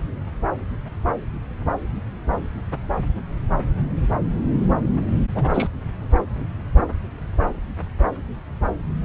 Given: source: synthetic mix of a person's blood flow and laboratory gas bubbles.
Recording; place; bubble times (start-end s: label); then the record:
Doppler ultrasound of blood flow; subclavian vein
5.34-5.67 s: bubbles
From the record:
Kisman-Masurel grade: 212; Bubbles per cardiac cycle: several, 3 to 8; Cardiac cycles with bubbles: 1 to 10%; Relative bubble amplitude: moderate (0.250 to 0.450); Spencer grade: 1 (occasional bubble signal discernible with the cardiac motion signal, with majority of cardiac periods free of bubbles); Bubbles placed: anywhere in the cardiac cycle